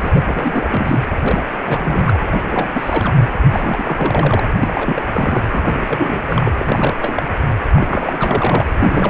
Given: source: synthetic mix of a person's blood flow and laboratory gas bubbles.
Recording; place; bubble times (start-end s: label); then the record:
Doppler ultrasound of blood flow; precordium
0.00-0.99 s: bubbles
1.22-1.42 s: bubbles
1.65-2.29 s: bubbles
2.32-2.70 s: bubbles
2.74-3.14 s: bubbles
3.52-4.44 s: bubbles
4.59-5.02 s: bubbles
5.14-5.44 s: bubbles
5.49-6.49 s: bubbles
6.58-6.94 s: bubbles
7.02-7.23 s: bubbles
7.75-8.66 s: bubbles
8.78-9.10 s: bubbles
From the record:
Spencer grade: 3 (all of the cardiac periods contain showers or single bubble signals, but not dominating or overriding the cardiac motion signals); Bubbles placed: anywhere in the cardiac cycle